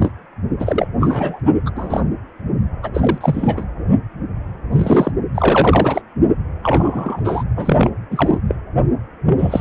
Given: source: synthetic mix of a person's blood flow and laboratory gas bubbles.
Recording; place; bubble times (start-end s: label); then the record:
Doppler ultrasound of blood flow; precordium
0.00-0.12 s: bubbles
0.59-0.88 s: bubbles
1.00-1.41 s: bubbles
1.66-1.70 s: bubbles
1.75-2.04 s: bubbles
2.82-2.89 s: bubbles
2.94-3.65 s: bubbles
4.72-5.12 s: bubbles
5.34-6.01 s: bubbles
6.62-7.21 s: bubbles
7.25-7.43 s: bubbles
7.56-7.90 s: bubbles
8.10-8.38 s: bubbles
8.48-8.55 s: bubbles
9.25-9.61 s: bubbles
From the record:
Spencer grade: 3 (all of the cardiac periods contain showers or single bubble signals, but not dominating or overriding the cardiac motion signals); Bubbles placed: only in the low amplitude regions of the cardiac cycle